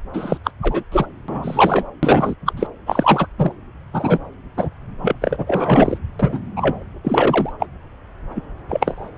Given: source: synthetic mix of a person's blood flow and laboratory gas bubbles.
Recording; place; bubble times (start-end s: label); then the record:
Doppler ultrasound of blood flow; subclavian vein
0.13-0.38 s: bubbles
0.44-0.51 s: bubbles
0.61-0.83 s: bubbles
0.92-1.07 s: bubbles
1.28-1.84 s: bubbles
2.02-2.35 s: bubbles
2.46-2.53 s: bubbles
2.56-2.68 s: bubbles
2.86-3.27 s: bubbles
3.38-3.52 s: bubbles
3.93-4.18 s: bubbles
4.57-4.70 s: bubbles
5.01-5.16 s: bubbles
5.21-5.98 s: bubbles
6.19-6.40 s: bubbles
6.56-6.83 s: bubbles
7.04-7.52 s: bubbles
7.60-7.66 s: bubbles
8.35-8.41 s: bubbles
8.69-9.10 s: bubbles
From the record:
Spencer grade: 3 (all of the cardiac periods contain showers or single bubble signals, but not dominating or overriding the cardiac motion signals); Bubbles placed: anywhere in the cardiac cycle